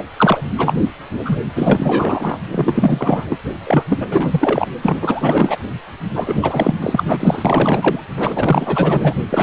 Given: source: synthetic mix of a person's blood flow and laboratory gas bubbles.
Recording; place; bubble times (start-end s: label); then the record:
Doppler ultrasound of blood flow; precordium
0.00-0.02 s: bubbles
0.16-0.42 s: bubbles
0.57-0.73 s: bubbles
1.25-1.36 s: bubbles
1.55-2.38 s: bubbles
2.51-3.27 s: bubbles
3.29-3.40 s: bubbles
3.64-3.84 s: bubbles
3.89-4.66 s: bubbles
4.82-5.57 s: bubbles
6.15-6.75 s: bubbles
6.81-7.04 s: bubbles
7.08-8.03 s: bubbles
8.16-9.13 s: bubbles
9.29-9.42 s: bubbles
From the record:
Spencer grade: 4 (maximum detectable bubble signal sounding continuously throughout systole and diastole of every cardiac period, and overriding the amplitude of the normal cardiac signals); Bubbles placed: anywhere in the cardiac cycle